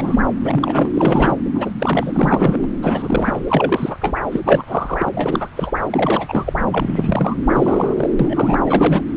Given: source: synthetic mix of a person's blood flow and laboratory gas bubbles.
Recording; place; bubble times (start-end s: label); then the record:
Doppler ultrasound of blood flow; subclavian vein
0.00-0.20 s: bubbles
0.41-1.36 s: bubbles
1.54-1.71 s: bubbles
1.80-2.69 s: bubbles
2.81-3.42 s: bubbles
3.48-3.96 s: bubbles
4.01-4.16 s: bubbles
4.32-4.40 s: bubbles
4.45-4.63 s: bubbles
4.67-5.09 s: bubbles
5.12-5.48 s: bubbles
5.56-5.71 s: bubbles
5.90-6.53 s: bubbles
6.71-7.35 s: bubbles
7.46-7.94 s: bubbles
7.97-8.12 s: bubbles
8.19-8.59 s: bubbles
8.65-9.02 s: bubbles
From the record:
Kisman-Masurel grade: 343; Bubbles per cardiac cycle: rolling drumbeat, 9 or more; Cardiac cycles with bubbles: 100%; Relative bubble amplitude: loud (0.450 to 0.775); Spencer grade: 3 (all of the cardiac periods contain showers or single bubble signals, but not dominating or overriding the cardiac motion signals); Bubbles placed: anywhere in the cardiac cycle